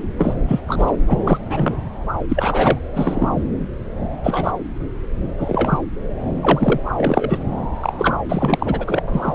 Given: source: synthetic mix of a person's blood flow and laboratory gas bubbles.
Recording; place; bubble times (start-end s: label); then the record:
Doppler ultrasound of blood flow; subclavian vein
0.18-0.34 s: bubbles
0.47-0.61 s: bubbles
0.68-0.97 s: bubbles
1.06-1.22 s: bubbles
1.24-1.39 s: bubbles
1.49-1.76 s: bubbles
2.28-2.79 s: bubbles
2.93-3.43 s: bubbles
4.24-4.51 s: bubbles
5.39-5.79 s: bubbles
6.42-6.80 s: bubbles
6.96-7.39 s: bubbles
7.73-8.17 s: bubbles
8.29-9.00 s: bubbles
9.07-9.33 s: bubbles
From the record:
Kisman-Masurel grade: 233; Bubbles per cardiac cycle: several, 3 to 8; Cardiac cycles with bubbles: 50 to 99%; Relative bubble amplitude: loud (0.450 to 0.775); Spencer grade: 3 (all of the cardiac periods contain showers or single bubble signals, but not dominating or overriding the cardiac motion signals); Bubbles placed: anywhere in the cardiac cycle